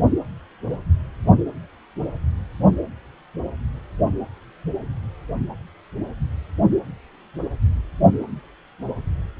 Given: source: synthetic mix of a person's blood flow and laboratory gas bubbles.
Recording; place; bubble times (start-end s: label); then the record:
Doppler ultrasound of blood flow; precordium
no bubbles
From the record:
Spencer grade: 0 (complete lack of bubble signals)